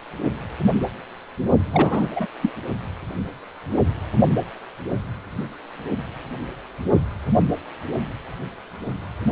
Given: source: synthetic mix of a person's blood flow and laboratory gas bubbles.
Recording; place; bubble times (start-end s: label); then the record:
Doppler ultrasound of blood flow; precordium
1.72-2.08 s: bubbles
2.15-2.25 s: bubbles
2.41-2.50 s: bubbles
From the record:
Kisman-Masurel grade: 212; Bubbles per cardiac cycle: several, 3 to 8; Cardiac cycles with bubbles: 1 to 10%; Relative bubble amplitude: moderate (0.250 to 0.450); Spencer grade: 1 (occasional bubble signal discernible with the cardiac motion signal, with majority of cardiac periods free of bubbles); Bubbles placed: only in the low amplitude regions of the cardiac cycle